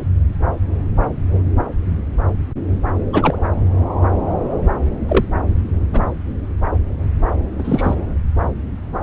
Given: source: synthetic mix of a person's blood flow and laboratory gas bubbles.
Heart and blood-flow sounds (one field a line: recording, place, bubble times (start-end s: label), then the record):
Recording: Doppler ultrasound of blood flow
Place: subclavian vein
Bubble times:
3.12-3.38 s: bubbles
5.08-5.25 s: bubbles
5.92-6.03 s: bubbles
7.58-7.94 s: bubbles
From the record:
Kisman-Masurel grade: 123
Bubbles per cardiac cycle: 1 to 2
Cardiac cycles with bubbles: 10 to 50%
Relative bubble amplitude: loud (0.450 to 0.775)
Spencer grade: 2 (many but less than half of the cardiac periods contain bubble signals, singularly or in groups)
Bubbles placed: anywhere in the cardiac cycle